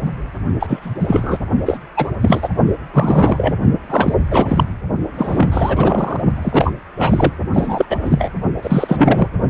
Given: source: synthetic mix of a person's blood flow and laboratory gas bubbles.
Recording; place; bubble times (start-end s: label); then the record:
Doppler ultrasound of blood flow; precordium
0.59-0.94 s: bubbles
0.99-1.39 s: bubbles
1.66-1.78 s: bubbles
1.96-2.08 s: bubbles
2.21-2.48 s: bubbles
2.93-3.54 s: bubbles
3.89-4.14 s: bubbles
4.30-4.64 s: bubbles
5.18-6.21 s: bubbles
6.42-6.74 s: bubbles
6.99-7.31 s: bubbles
7.54-7.86 s: bubbles
7.90-7.97 s: bubbles
8.02-8.31 s: bubbles
8.62-9.28 s: bubbles
From the record:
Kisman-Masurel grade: 333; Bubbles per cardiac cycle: rolling drumbeat, 9 or more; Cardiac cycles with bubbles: 50 to 99%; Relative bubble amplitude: loud (0.450 to 0.775); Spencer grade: 3 (all of the cardiac periods contain showers or single bubble signals, but not dominating or overriding the cardiac motion signals); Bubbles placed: only in the low amplitude regions of the cardiac cycle